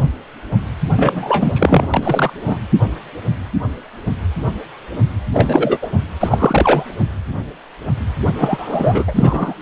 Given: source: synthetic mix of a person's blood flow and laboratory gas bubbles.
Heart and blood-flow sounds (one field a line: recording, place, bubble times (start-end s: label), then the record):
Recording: Doppler ultrasound of blood flow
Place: precordium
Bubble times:
0.96-1.87 s: bubbles
1.94-2.33 s: bubbles
2.46-2.60 s: bubbles
5.33-5.78 s: bubbles
5.82-5.88 s: bubbles
6.20-6.85 s: bubbles
8.37-9.04 s: bubbles
9.06-9.54 s: bubbles
From the record:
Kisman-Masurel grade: 233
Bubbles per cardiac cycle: several, 3 to 8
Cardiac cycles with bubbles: 50 to 99%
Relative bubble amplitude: loud (0.450 to 0.775)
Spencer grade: 3 (all of the cardiac periods contain showers or single bubble signals, but not dominating or overriding the cardiac motion signals)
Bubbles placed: anywhere in the cardiac cycle